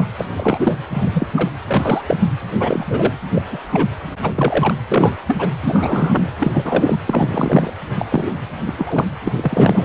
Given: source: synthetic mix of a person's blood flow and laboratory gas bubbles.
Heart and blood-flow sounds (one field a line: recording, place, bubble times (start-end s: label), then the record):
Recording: Doppler ultrasound of blood flow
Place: precordium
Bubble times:
0.00-0.06 s: bubbles
0.18-0.24 s: bubbles
0.38-0.76 s: bubbles
0.90-1.27 s: bubbles
1.34-1.50 s: bubbles
1.67-2.02 s: bubbles
2.06-2.17 s: bubbles
2.58-3.12 s: bubbles
3.34-3.42 s: bubbles
3.51-3.58 s: bubbles
3.72-3.87 s: bubbles
4.22-4.32 s: bubbles
4.35-4.74 s: bubbles
4.92-5.15 s: bubbles
5.27-5.50 s: bubbles
5.62-6.31 s: bubbles
6.40-6.96 s: bubbles
7.07-7.72 s: bubbles
7.98-8.05 s: bubbles
8.09-8.31 s: bubbles
8.66-8.73 s: bubbles
8.78-9.05 s: bubbles
9.24-9.32 s: bubbles
9.35-9.85 s: bubbles
From the record:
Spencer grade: 3 (all of the cardiac periods contain showers or single bubble signals, but not dominating or overriding the cardiac motion signals)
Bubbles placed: anywhere in the cardiac cycle